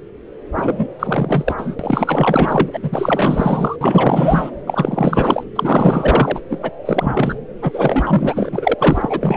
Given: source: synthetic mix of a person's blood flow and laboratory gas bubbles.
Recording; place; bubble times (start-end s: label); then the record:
Doppler ultrasound of blood flow; subclavian vein
0.57-0.88 s: bubbles
0.99-1.54 s: bubbles
1.57-1.75 s: bubbles
1.79-2.71 s: bubbles
2.73-2.79 s: bubbles
2.82-3.76 s: bubbles
3.81-4.51 s: bubbles
4.67-5.44 s: bubbles
5.55-6.40 s: bubbles
6.49-6.58 s: bubbles
6.62-6.71 s: bubbles
6.85-7.40 s: bubbles
7.62-8.74 s: bubbles
8.79-9.37 s: bubbles
From the record:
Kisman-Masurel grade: 444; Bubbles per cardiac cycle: continuous sound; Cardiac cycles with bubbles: 100%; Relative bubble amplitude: maximal (0.775 to 0.999); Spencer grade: 4 (maximum detectable bubble signal sounding continuously throughout systole and diastole of every cardiac period, and overriding the amplitude of the normal cardiac signals); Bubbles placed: anywhere in the cardiac cycle